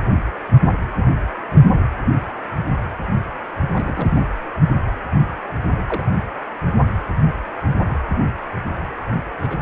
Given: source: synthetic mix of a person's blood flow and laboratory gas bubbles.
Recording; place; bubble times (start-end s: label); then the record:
Doppler ultrasound of blood flow; precordium
3.73-4.24 s: bubbles
5.87-6.06 s: bubbles
9.42-9.57 s: bubbles
From the record:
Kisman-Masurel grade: 121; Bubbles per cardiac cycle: 1 to 2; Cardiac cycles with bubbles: 10 to 50%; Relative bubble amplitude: barely perceptible (0.100 to 0.250); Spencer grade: 2 (many but less than half of the cardiac periods contain bubble signals, singularly or in groups); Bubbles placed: anywhere in the cardiac cycle